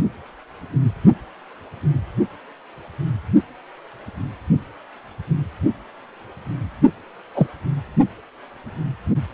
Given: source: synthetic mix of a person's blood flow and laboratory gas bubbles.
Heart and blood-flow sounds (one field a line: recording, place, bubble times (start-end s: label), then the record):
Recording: Doppler ultrasound of blood flow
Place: precordium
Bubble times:
7.34-7.46 s: bubbles
From the record:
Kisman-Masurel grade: 113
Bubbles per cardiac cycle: 1 to 2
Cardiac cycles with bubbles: 1 to 10%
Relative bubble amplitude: loud (0.450 to 0.775)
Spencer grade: 1 (occasional bubble signal discernible with the cardiac motion signal, with majority of cardiac periods free of bubbles)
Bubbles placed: only in the low amplitude regions of the cardiac cycle